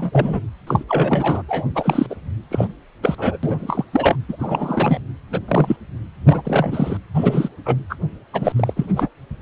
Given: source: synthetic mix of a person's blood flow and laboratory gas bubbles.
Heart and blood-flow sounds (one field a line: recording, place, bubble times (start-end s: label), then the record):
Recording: Doppler ultrasound of blood flow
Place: precordium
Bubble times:
0.00-0.42 s: bubbles
0.66-0.84 s: bubbles
0.88-1.43 s: bubbles
1.48-1.66 s: bubbles
1.75-2.06 s: bubbles
2.10-2.15 s: bubbles
2.51-2.68 s: bubbles
3.02-3.15 s: bubbles
3.18-3.38 s: bubbles
3.43-3.86 s: bubbles
3.93-4.16 s: bubbles
4.29-4.36 s: bubbles
4.38-4.99 s: bubbles
5.31-5.39 s: bubbles
5.48-5.76 s: bubbles
6.25-6.42 s: bubbles
6.45-6.97 s: bubbles
7.14-7.49 s: bubbles
7.65-7.75 s: bubbles
7.89-7.96 s: bubbles
8.33-8.52 s: bubbles
8.56-9.09 s: bubbles
From the record:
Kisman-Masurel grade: 243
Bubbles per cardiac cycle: several, 3 to 8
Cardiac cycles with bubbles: 100%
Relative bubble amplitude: loud (0.450 to 0.775)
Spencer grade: 3 (all of the cardiac periods contain showers or single bubble signals, but not dominating or overriding the cardiac motion signals)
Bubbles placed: anywhere in the cardiac cycle